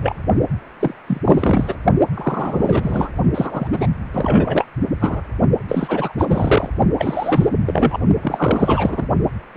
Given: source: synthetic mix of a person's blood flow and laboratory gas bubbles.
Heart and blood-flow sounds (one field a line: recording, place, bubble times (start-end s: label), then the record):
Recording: Doppler ultrasound of blood flow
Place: precordium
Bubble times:
0.01-0.16 s: bubbles
0.79-0.94 s: bubbles
1.07-1.21 s: bubbles
1.24-1.75 s: bubbles
2.14-3.09 s: bubbles
3.34-3.68 s: bubbles
3.72-3.87 s: bubbles
4.13-4.66 s: bubbles
5.00-5.21 s: bubbles
5.68-6.12 s: bubbles
6.17-6.70 s: bubbles
6.97-7.49 s: bubbles
7.66-7.97 s: bubbles
8.21-9.08 s: bubbles
9.54-9.57 s: bubbles
From the record:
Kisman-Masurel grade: 343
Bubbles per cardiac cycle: rolling drumbeat, 9 or more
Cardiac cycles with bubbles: 100%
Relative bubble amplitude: loud (0.450 to 0.775)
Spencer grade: 3 (all of the cardiac periods contain showers or single bubble signals, but not dominating or overriding the cardiac motion signals)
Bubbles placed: only in the low amplitude regions of the cardiac cycle